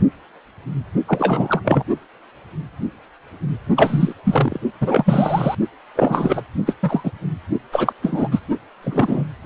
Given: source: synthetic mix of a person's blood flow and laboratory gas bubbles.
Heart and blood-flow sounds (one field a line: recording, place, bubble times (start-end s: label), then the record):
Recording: Doppler ultrasound of blood flow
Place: precordium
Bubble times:
1.06-1.61 s: bubbles
1.64-1.83 s: bubbles
3.77-4.13 s: bubbles
4.25-4.59 s: bubbles
4.80-5.55 s: bubbles
5.96-6.42 s: bubbles
6.66-6.75 s: bubbles
6.83-7.11 s: bubbles
7.72-7.93 s: bubbles
8.02-8.28 s: bubbles
8.31-8.39 s: bubbles
8.82-9.23 s: bubbles
From the record:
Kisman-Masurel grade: 233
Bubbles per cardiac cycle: several, 3 to 8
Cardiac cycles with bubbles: 50 to 99%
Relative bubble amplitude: loud (0.450 to 0.775)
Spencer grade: 3 (all of the cardiac periods contain showers or single bubble signals, but not dominating or overriding the cardiac motion signals)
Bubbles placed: only in the low amplitude regions of the cardiac cycle